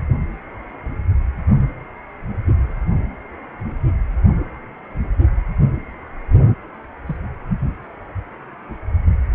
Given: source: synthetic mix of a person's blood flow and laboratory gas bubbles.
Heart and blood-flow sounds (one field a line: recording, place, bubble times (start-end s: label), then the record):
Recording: Doppler ultrasound of blood flow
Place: precordium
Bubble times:
7.06-7.17 s: bubbles
From the record:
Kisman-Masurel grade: 111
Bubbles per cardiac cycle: 1 to 2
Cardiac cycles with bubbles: 1 to 10%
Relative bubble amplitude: barely perceptible (0.100 to 0.250)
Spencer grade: 1 (occasional bubble signal discernible with the cardiac motion signal, with majority of cardiac periods free of bubbles)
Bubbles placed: only in the low amplitude regions of the cardiac cycle